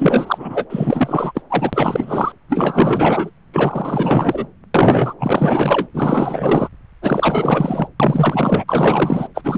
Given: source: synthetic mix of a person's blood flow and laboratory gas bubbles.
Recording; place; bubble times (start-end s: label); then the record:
Doppler ultrasound of blood flow; subclavian vein
0.00-0.66 s: bubbles
0.69-1.32 s: bubbles
1.34-1.42 s: bubbles
1.50-2.32 s: bubbles
2.49-3.30 s: bubbles
3.53-4.46 s: bubbles
4.74-5.14 s: bubbles
5.18-5.87 s: bubbles
5.93-6.68 s: bubbles
7.01-7.88 s: bubbles
8.00-8.64 s: bubbles
8.68-9.28 s: bubbles
9.35-9.42 s: bubbles
9.44-9.58 s: bubbles
From the record:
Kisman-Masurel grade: 444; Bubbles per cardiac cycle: continuous sound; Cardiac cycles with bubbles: 100%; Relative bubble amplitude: maximal (0.775 to 0.999); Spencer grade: 4 (maximum detectable bubble signal sounding continuously throughout systole and diastole of every cardiac period, and overriding the amplitude of the normal cardiac signals); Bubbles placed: anywhere in the cardiac cycle